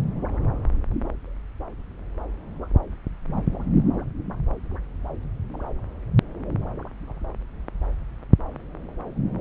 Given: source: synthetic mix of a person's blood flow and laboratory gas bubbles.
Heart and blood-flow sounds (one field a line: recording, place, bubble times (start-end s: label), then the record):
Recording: Doppler ultrasound of blood flow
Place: subclavian vein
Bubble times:
no bubbles
From the record:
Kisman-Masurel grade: 000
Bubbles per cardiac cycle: 0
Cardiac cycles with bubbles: 0%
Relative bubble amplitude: no bubbles discernible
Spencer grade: 0 (complete lack of bubble signals)